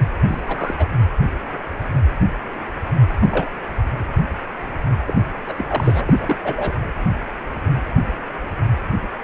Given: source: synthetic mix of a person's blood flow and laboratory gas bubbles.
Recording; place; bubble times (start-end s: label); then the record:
Doppler ultrasound of blood flow; precordium
0.28-0.41 s: bubbles
0.47-0.90 s: bubbles
3.20-3.46 s: bubbles
5.07-5.15 s: bubbles
5.47-5.54 s: bubbles
5.58-5.66 s: bubbles
5.69-6.05 s: bubbles
6.09-6.36 s: bubbles
6.44-6.74 s: bubbles
From the record:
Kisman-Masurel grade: 222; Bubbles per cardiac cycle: several, 3 to 8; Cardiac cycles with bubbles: 10 to 50%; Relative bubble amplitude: moderate (0.250 to 0.450); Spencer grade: 2 (many but less than half of the cardiac periods contain bubble signals, singularly or in groups); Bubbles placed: anywhere in the cardiac cycle